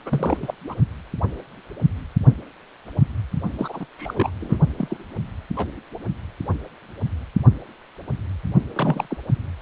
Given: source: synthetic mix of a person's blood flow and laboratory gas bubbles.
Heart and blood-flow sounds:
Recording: Doppler ultrasound of blood flow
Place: precordium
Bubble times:
0.05-0.38 s: bubbles
0.41-0.53 s: bubbles
0.67-0.74 s: bubbles
3.58-3.85 s: bubbles
3.98-4.31 s: bubbles
4.41-4.58 s: bubbles
4.77-4.97 s: bubbles
5.57-5.67 s: bubbles
8.75-9.07 s: bubbles
9.10-9.16 s: bubbles
From the record:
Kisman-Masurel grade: 222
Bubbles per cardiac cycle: several, 3 to 8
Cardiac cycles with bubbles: 10 to 50%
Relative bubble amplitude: moderate (0.250 to 0.450)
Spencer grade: 2 (many but less than half of the cardiac periods contain bubble signals, singularly or in groups)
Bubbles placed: only in the low amplitude regions of the cardiac cycle

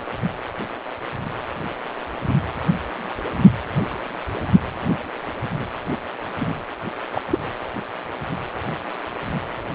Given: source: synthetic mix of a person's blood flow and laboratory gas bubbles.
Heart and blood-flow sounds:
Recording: Doppler ultrasound of blood flow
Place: precordium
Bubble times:
6.39-6.55 s: bubbles
7.11-7.21 s: bubbles
7.29-7.38 s: bubbles
From the record:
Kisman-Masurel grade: 212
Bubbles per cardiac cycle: several, 3 to 8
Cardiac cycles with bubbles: 1 to 10%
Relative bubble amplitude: moderate (0.250 to 0.450)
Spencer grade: 1 (occasional bubble signal discernible with the cardiac motion signal, with majority of cardiac periods free of bubbles)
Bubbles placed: anywhere in the cardiac cycle

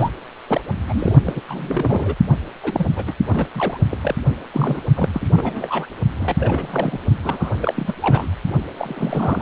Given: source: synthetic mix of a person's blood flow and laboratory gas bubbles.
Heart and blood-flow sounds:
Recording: Doppler ultrasound of blood flow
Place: precordium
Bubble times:
0.00-0.09 s: bubbles
0.47-0.61 s: bubbles
0.86-1.16 s: bubbles
1.26-1.41 s: bubbles
1.48-2.15 s: bubbles
2.63-2.86 s: bubbles
2.96-3.04 s: bubbles
3.07-3.14 s: bubbles
3.28-3.47 s: bubbles
3.55-3.78 s: bubbles
3.90-3.98 s: bubbles
4.02-4.14 s: bubbles
4.53-4.83 s: bubbles
4.96-5.10 s: bubbles
5.14-5.32 s: bubbles
5.35-5.87 s: bubbles
6.17-6.98 s: bubbles
7.24-7.51 s: bubbles
7.61-7.95 s: bubbles
8.02-8.33 s: bubbles
8.76-9.42 s: bubbles
From the record:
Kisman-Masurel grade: 342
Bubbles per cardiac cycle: rolling drumbeat, 9 or more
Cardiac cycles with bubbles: 100%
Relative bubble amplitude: moderate (0.250 to 0.450)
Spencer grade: 3 (all of the cardiac periods contain showers or single bubble signals, but not dominating or overriding the cardiac motion signals)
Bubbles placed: only in the low amplitude regions of the cardiac cycle

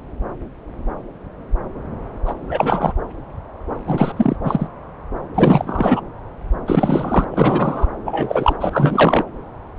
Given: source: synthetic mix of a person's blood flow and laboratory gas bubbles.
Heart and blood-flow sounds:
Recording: Doppler ultrasound of blood flow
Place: subclavian vein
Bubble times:
2.25-2.34 s: bubbles
2.48-2.93 s: bubbles
3.87-4.36 s: bubbles
4.43-4.67 s: bubbles
5.34-6.00 s: bubbles
6.66-7.25 s: bubbles
7.31-7.88 s: bubbles
8.05-8.57 s: bubbles
8.60-9.25 s: bubbles
From the record:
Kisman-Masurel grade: 333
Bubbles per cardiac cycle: rolling drumbeat, 9 or more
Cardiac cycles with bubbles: 50 to 99%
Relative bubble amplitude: loud (0.450 to 0.775)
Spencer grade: 3 (all of the cardiac periods contain showers or single bubble signals, but not dominating or overriding the cardiac motion signals)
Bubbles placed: anywhere in the cardiac cycle

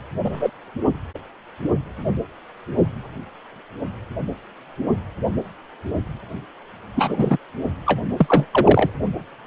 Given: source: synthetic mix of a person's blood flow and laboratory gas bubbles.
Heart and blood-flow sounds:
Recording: Doppler ultrasound of blood flow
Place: precordium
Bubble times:
0.24-0.50 s: bubbles
6.96-7.38 s: bubbles
7.87-8.00 s: bubbles
8.18-8.47 s: bubbles
8.52-8.90 s: bubbles
From the record:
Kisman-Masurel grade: 223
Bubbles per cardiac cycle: several, 3 to 8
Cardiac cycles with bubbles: 10 to 50%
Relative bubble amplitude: loud (0.450 to 0.775)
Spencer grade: 2 (many but less than half of the cardiac periods contain bubble signals, singularly or in groups)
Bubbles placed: anywhere in the cardiac cycle

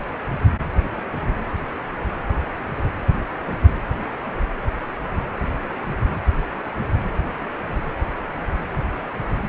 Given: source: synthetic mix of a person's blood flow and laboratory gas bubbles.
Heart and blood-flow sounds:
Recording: Doppler ultrasound of blood flow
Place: precordium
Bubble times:
no bubbles
From the record:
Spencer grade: 0 (complete lack of bubble signals)

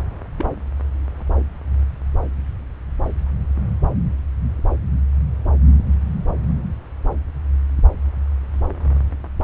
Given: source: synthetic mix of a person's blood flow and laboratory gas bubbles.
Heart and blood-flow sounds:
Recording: Doppler ultrasound of blood flow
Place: subclavian vein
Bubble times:
0.38-0.45 s: bubbles
From the record:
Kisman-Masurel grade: 111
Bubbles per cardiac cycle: 1 to 2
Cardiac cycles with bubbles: 1 to 10%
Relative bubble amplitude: barely perceptible (0.100 to 0.250)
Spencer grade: 1 (occasional bubble signal discernible with the cardiac motion signal, with majority of cardiac periods free of bubbles)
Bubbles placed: anywhere in the cardiac cycle

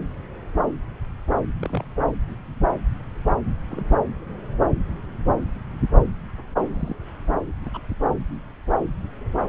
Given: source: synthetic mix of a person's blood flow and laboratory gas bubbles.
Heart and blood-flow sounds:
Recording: Doppler ultrasound of blood flow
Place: subclavian vein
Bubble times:
1.60-1.85 s: bubbles
3.71-3.97 s: bubbles
6.73-6.95 s: bubbles
7.65-7.69 s: bubbles
7.73-7.81 s: bubbles
From the record:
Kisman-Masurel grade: 121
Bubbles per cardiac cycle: 1 to 2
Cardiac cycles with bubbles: 10 to 50%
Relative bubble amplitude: barely perceptible (0.100 to 0.250)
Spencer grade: 2 (many but less than half of the cardiac periods contain bubble signals, singularly or in groups)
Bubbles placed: anywhere in the cardiac cycle

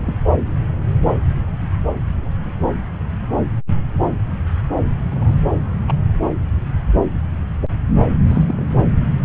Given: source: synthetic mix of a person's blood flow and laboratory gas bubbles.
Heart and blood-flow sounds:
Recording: Doppler ultrasound of blood flow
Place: subclavian vein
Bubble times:
0.03-0.14 s: bubbles
5.11-5.37 s: bubbles
5.88-5.92 s: bubbles
8.27-8.43 s: bubbles
8.48-8.65 s: bubbles
From the record:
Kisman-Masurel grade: 121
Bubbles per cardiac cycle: 1 to 2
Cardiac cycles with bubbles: 10 to 50%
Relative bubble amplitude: barely perceptible (0.100 to 0.250)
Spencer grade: 2 (many but less than half of the cardiac periods contain bubble signals, singularly or in groups)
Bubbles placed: anywhere in the cardiac cycle

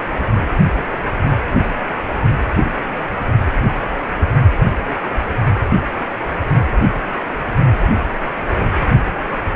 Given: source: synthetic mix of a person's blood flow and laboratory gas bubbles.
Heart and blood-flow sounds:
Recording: Doppler ultrasound of blood flow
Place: precordium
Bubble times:
2.62-2.71 s: bubbles
From the record:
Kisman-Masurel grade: 121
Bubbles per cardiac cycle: 1 to 2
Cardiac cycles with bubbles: 10 to 50%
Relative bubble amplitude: barely perceptible (0.100 to 0.250)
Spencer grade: 2 (many but less than half of the cardiac periods contain bubble signals, singularly or in groups)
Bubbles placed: only in the low amplitude regions of the cardiac cycle

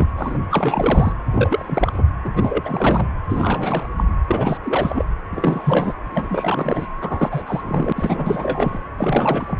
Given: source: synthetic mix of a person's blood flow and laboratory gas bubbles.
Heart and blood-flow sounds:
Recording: Doppler ultrasound of blood flow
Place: precordium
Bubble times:
0.00-0.07 s: bubbles
0.17-0.39 s: bubbles
0.49-1.12 s: bubbles
1.32-2.02 s: bubbles
2.24-3.09 s: bubbles
3.28-3.87 s: bubbles
3.97-4.04 s: bubbles
4.29-4.58 s: bubbles
4.63-5.05 s: bubbles
5.31-5.93 s: bubbles
6.11-6.87 s: bubbles
7.01-7.43 s: bubbles
7.46-7.93 s: bubbles
7.95-8.79 s: bubbles
8.97-9.60 s: bubbles
From the record:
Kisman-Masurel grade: 343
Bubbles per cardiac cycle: rolling drumbeat, 9 or more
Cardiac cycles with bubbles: 100%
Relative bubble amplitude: loud (0.450 to 0.775)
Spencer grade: 3 (all of the cardiac periods contain showers or single bubble signals, but not dominating or overriding the cardiac motion signals)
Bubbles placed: anywhere in the cardiac cycle

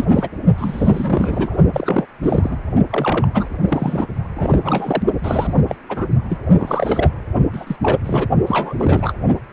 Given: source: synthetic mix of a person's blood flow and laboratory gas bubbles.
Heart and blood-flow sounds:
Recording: Doppler ultrasound of blood flow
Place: precordium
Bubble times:
0.00-0.05 s: bubbles
0.08-0.29 s: bubbles
0.57-1.57 s: bubbles
1.73-2.06 s: bubbles
2.22-2.57 s: bubbles
2.91-3.27 s: bubbles
3.34-3.48 s: bubbles
3.68-4.07 s: bubbles
4.35-5.03 s: bubbles
5.23-5.55 s: bubbles
5.68-5.75 s: bubbles
5.89-6.07 s: bubbles
6.30-6.38 s: bubbles
6.58-7.11 s: bubbles
7.53-7.76 s: bubbles
7.82-7.99 s: bubbles
8.04-8.28 s: bubbles
8.46-8.74 s: bubbles
8.79-9.12 s: bubbles
From the record:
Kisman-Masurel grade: 342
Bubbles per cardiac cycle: rolling drumbeat, 9 or more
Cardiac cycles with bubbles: 100%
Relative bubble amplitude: moderate (0.250 to 0.450)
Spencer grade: 3 (all of the cardiac periods contain showers or single bubble signals, but not dominating or overriding the cardiac motion signals)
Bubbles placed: only in the low amplitude regions of the cardiac cycle

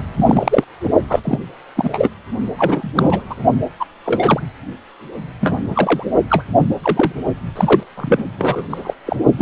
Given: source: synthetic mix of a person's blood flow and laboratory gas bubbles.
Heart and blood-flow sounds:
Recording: Doppler ultrasound of blood flow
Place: precordium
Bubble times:
0.17-0.64 s: bubbles
1.09-1.20 s: bubbles
1.24-1.40 s: bubbles
1.76-2.09 s: bubbles
2.56-3.25 s: bubbles
3.29-3.35 s: bubbles
3.79-3.86 s: bubbles
4.05-4.40 s: bubbles
5.41-5.59 s: bubbles
5.70-6.04 s: bubbles
6.29-6.45 s: bubbles
6.82-7.12 s: bubbles
7.55-7.83 s: bubbles
7.97-8.24 s: bubbles
8.38-8.62 s: bubbles
8.70-8.94 s: bubbles
9.06-9.16 s: bubbles
9.38-9.42 s: bubbles
From the record:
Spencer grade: 3 (all of the cardiac periods contain showers or single bubble signals, but not dominating or overriding the cardiac motion signals)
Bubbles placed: only in the low amplitude regions of the cardiac cycle

